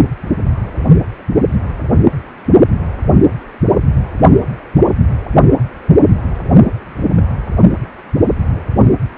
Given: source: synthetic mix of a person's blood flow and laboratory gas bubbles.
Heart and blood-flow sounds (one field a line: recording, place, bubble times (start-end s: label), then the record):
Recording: Doppler ultrasound of blood flow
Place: precordium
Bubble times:
0.30-0.35 s: bubbles
1.18-1.23 s: bubbles
7.14-7.23 s: bubbles
8.48-8.60 s: bubbles
From the record:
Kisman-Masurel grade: 121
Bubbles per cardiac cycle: 1 to 2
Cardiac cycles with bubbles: 10 to 50%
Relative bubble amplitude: barely perceptible (0.100 to 0.250)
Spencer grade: 2 (many but less than half of the cardiac periods contain bubble signals, singularly or in groups)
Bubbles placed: only in the low amplitude regions of the cardiac cycle